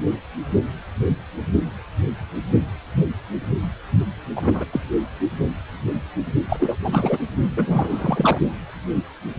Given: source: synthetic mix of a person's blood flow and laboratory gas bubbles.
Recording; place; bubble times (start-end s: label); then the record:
Doppler ultrasound of blood flow; precordium
4.35-4.65 s: bubbles
4.72-4.80 s: bubbles
6.49-6.57 s: bubbles
6.59-6.76 s: bubbles
6.83-7.19 s: bubbles
7.57-8.38 s: bubbles
From the record:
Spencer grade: 2 (many but less than half of the cardiac periods contain bubble signals, singularly or in groups); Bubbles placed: only in the low amplitude regions of the cardiac cycle